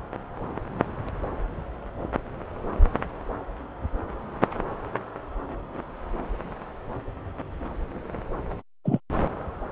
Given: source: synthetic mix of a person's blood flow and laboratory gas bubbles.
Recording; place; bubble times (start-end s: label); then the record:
Doppler ultrasound of blood flow; subclavian vein
8.84-8.99 s: bubbles
From the record:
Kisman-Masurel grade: 113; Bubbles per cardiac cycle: 1 to 2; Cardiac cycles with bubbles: 1 to 10%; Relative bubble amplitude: loud (0.450 to 0.775); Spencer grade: 1 (occasional bubble signal discernible with the cardiac motion signal, with majority of cardiac periods free of bubbles); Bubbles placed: anywhere in the cardiac cycle